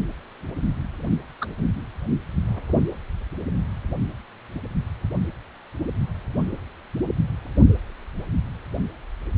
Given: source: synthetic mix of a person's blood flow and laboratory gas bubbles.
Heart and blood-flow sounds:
Doppler ultrasound of blood flow; precordium
1.41-1.46 s: bubbles
From the record:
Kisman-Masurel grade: 123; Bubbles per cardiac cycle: 1 to 2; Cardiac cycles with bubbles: 10 to 50%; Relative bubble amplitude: loud (0.450 to 0.775); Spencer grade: 2 (many but less than half of the cardiac periods contain bubble signals, singularly or in groups); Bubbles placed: only in the low amplitude regions of the cardiac cycle

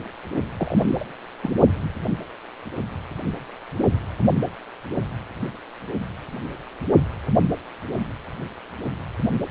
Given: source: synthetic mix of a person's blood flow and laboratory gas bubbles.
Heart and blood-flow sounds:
Doppler ultrasound of blood flow; precordium
0.57-1.06 s: bubbles
1.42-1.54 s: bubbles
From the record:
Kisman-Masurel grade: 212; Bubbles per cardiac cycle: several, 3 to 8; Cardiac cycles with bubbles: 1 to 10%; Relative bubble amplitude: moderate (0.250 to 0.450); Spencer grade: 1 (occasional bubble signal discernible with the cardiac motion signal, with majority of cardiac periods free of bubbles); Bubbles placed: only in the low amplitude regions of the cardiac cycle

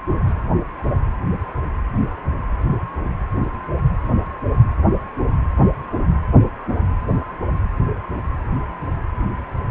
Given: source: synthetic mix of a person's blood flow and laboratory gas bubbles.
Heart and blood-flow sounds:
Doppler ultrasound of blood flow; precordium
no bubbles
From the record:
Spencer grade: 0 (complete lack of bubble signals)

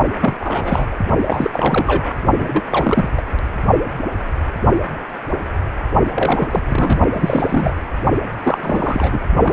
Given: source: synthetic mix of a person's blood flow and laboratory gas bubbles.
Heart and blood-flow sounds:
Doppler ultrasound of blood flow; precordium
0.20-0.36 s: bubbles
0.40-0.88 s: bubbles
0.91-0.97 s: bubbles
1.27-2.15 s: bubbles
2.38-2.62 s: bubbles
2.71-3.09 s: bubbles
3.17-3.21 s: bubbles
6.14-6.61 s: bubbles
6.66-6.99 s: bubbles
7.12-7.73 s: bubbles
8.44-8.58 s: bubbles
8.62-9.20 s: bubbles
9.43-9.53 s: bubbles
From the record:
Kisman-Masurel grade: 332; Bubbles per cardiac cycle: rolling drumbeat, 9 or more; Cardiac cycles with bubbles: 50 to 99%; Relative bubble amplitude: moderate (0.250 to 0.450); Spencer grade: 3 (all of the cardiac periods contain showers or single bubble signals, but not dominating or overriding the cardiac motion signals); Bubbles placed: only in the low amplitude regions of the cardiac cycle

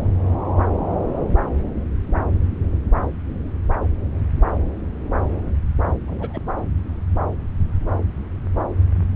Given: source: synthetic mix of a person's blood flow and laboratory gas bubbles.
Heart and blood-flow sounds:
Doppler ultrasound of blood flow; subclavian vein
6.08-6.40 s: bubbles
From the record:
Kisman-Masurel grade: 211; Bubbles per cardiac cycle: several, 3 to 8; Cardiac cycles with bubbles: 1 to 10%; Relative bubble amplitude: barely perceptible (0.100 to 0.250); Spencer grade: 1 (occasional bubble signal discernible with the cardiac motion signal, with majority of cardiac periods free of bubbles); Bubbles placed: anywhere in the cardiac cycle

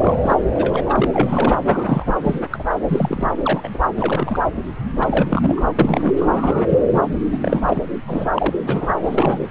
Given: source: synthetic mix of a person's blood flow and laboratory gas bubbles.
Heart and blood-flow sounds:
Doppler ultrasound of blood flow; subclavian vein
0.00-0.16 s: bubbles
0.22-0.36 s: bubbles
0.53-1.08 s: bubbles
1.13-1.57 s: bubbles
1.65-2.16 s: bubbles
2.23-2.39 s: bubbles
2.51-2.63 s: bubbles
2.88-3.32 s: bubbles
3.42-3.69 s: bubbles
3.73-3.78 s: bubbles
3.96-4.43 s: bubbles
4.99-5.62 s: bubbles
5.79-6.13 s: bubbles
6.19-6.65 s: bubbles
6.68-6.79 s: bubbles
6.88-7.06 s: bubbles
7.32-7.38 s: bubbles
7.42-7.83 s: bubbles
8.07-8.28 s: bubbles
8.33-8.53 s: bubbles
8.62-8.96 s: bubbles
8.98-9.45 s: bubbles
From the record:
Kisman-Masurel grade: 243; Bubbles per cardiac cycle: several, 3 to 8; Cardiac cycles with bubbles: 100%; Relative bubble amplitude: loud (0.450 to 0.775); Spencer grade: 3 (all of the cardiac periods contain showers or single bubble signals, but not dominating or overriding the cardiac motion signals); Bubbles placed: anywhere in the cardiac cycle

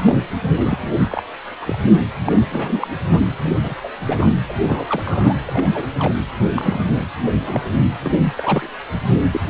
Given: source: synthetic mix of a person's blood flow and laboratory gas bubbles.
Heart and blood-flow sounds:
Doppler ultrasound of blood flow; precordium
0.00-0.21 s: bubbles
0.52-0.78 s: bubbles
1.03-1.21 s: bubbles
1.61-1.79 s: bubbles
2.25-2.47 s: bubbles
2.52-2.88 s: bubbles
3.10-3.21 s: bubbles
3.44-3.59 s: bubbles
3.62-3.75 s: bubbles
3.83-3.89 s: bubbles
4.02-4.35 s: bubbles
4.49-4.53 s: bubbles
4.62-4.86 s: bubbles
4.88-5.34 s: bubbles
5.47-5.67 s: bubbles
5.73-5.87 s: bubbles
5.99-6.14 s: bubbles
6.56-6.80 s: bubbles
7.39-7.62 s: bubbles
8.02-8.11 s: bubbles
8.23-8.69 s: bubbles
9.32-9.41 s: bubbles
From the record:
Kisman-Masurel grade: 242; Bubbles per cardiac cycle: several, 3 to 8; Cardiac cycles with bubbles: 100%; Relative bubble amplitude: moderate (0.250 to 0.450); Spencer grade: 3 (all of the cardiac periods contain showers or single bubble signals, but not dominating or overriding the cardiac motion signals); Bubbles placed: anywhere in the cardiac cycle

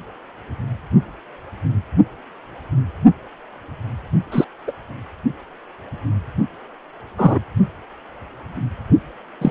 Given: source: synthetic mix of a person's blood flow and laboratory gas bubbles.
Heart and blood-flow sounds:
Doppler ultrasound of blood flow; precordium
4.32-4.45 s: bubbles
4.67-4.71 s: bubbles
7.18-7.38 s: bubbles
9.41-9.51 s: bubbles
From the record:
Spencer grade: 2 (many but less than half of the cardiac periods contain bubble signals, singularly or in groups); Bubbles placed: only in the low amplitude regions of the cardiac cycle

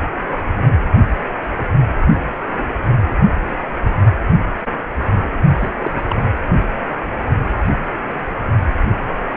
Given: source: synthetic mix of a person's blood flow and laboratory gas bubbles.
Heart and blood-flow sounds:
Doppler ultrasound of blood flow; precordium
5.58-5.69 s: bubbles
5.78-6.27 s: bubbles
From the record:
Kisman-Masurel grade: 212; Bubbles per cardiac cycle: several, 3 to 8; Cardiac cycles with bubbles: 1 to 10%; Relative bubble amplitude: moderate (0.250 to 0.450); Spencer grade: 1 (occasional bubble signal discernible with the cardiac motion signal, with majority of cardiac periods free of bubbles); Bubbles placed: only in the low amplitude regions of the cardiac cycle

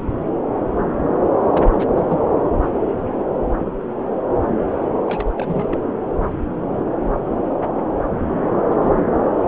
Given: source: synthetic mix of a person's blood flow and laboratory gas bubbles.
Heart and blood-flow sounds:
Doppler ultrasound of blood flow; subclavian vein
1.39-1.65 s: bubbles
1.72-1.86 s: bubbles
1.96-2.02 s: bubbles
2.09-2.19 s: bubbles
5.06-5.78 s: bubbles
8.71-8.76 s: bubbles
8.82-8.90 s: bubbles
8.97-9.04 s: bubbles
From the record:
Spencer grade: 2 (many but less than half of the cardiac periods contain bubble signals, singularly or in groups); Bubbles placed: anywhere in the cardiac cycle

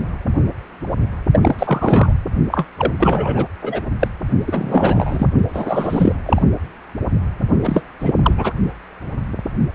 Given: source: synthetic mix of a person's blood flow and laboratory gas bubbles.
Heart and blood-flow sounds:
Doppler ultrasound of blood flow; precordium
1.32-1.40 s: bubbles
1.43-1.56 s: bubbles
1.59-2.12 s: bubbles
2.47-2.66 s: bubbles
2.78-2.94 s: bubbles
2.98-3.46 s: bubbles
3.61-3.81 s: bubbles
3.99-4.08 s: bubbles
4.47-5.27 s: bubbles
5.53-6.13 s: bubbles
6.25-6.42 s: bubbles
7.63-7.81 s: bubbles
8.00-8.14 s: bubbles
8.23-8.34 s: bubbles
8.37-8.53 s: bubbles
From the record:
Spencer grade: 3 (all of the cardiac periods contain showers or single bubble signals, but not dominating or overriding the cardiac motion signals); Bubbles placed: only in the low amplitude regions of the cardiac cycle

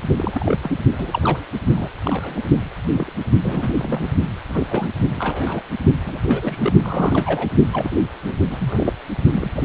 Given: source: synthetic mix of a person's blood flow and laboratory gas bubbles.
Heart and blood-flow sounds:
Doppler ultrasound of blood flow; precordium
0.17-0.57 s: bubbles
0.62-0.76 s: bubbles
0.91-1.44 s: bubbles
1.74-1.91 s: bubbles
2.04-2.43 s: bubbles
2.96-3.12 s: bubbles
3.42-4.12 s: bubbles
4.49-4.89 s: bubbles
5.09-5.60 s: bubbles
6.05-6.21 s: bubbles
6.27-6.72 s: bubbles
6.82-7.49 s: bubbles
7.72-7.97 s: bubbles
8.27-8.35 s: bubbles
8.50-8.93 s: bubbles
9.33-9.65 s: bubbles
From the record:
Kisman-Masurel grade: 242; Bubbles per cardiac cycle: several, 3 to 8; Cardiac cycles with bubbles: 100%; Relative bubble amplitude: moderate (0.250 to 0.450); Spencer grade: 3 (all of the cardiac periods contain showers or single bubble signals, but not dominating or overriding the cardiac motion signals); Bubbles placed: only in the low amplitude regions of the cardiac cycle

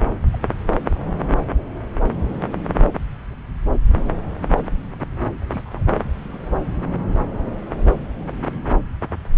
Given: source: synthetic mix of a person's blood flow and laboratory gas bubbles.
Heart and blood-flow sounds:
Doppler ultrasound of blood flow; subclavian vein
0.32-0.39 s: bubbles
1.76-1.79 s: bubbles
2.20-2.24 s: bubbles
5.37-5.83 s: bubbles
6.28-6.38 s: bubbles
6.68-6.71 s: bubbles
7.11-7.17 s: bubbles
From the record:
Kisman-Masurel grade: 121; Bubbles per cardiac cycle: 1 to 2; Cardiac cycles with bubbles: 10 to 50%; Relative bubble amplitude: barely perceptible (0.100 to 0.250); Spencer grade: 2 (many but less than half of the cardiac periods contain bubble signals, singularly or in groups); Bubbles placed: anywhere in the cardiac cycle

